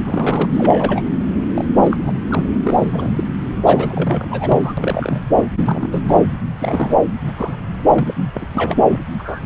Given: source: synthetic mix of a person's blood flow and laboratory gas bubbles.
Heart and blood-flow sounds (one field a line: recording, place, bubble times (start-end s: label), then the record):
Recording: Doppler ultrasound of blood flow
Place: subclavian vein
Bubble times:
0.05-0.45 s: bubbles
0.53-1.02 s: bubbles
1.55-1.65 s: bubbles
1.82-1.96 s: bubbles
2.06-2.12 s: bubbles
2.30-2.49 s: bubbles
2.63-3.24 s: bubbles
3.66-4.74 s: bubbles
4.77-5.20 s: bubbles
5.35-5.46 s: bubbles
5.66-6.03 s: bubbles
6.08-6.14 s: bubbles
6.59-6.99 s: bubbles
7.26-7.33 s: bubbles
7.37-7.56 s: bubbles
7.91-8.14 s: bubbles
8.33-8.47 s: bubbles
8.54-8.77 s: bubbles
8.90-9.00 s: bubbles
9.18-9.41 s: bubbles
From the record:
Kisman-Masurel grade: 242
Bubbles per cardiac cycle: several, 3 to 8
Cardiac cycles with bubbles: 100%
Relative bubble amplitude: moderate (0.250 to 0.450)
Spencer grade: 3 (all of the cardiac periods contain showers or single bubble signals, but not dominating or overriding the cardiac motion signals)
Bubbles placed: anywhere in the cardiac cycle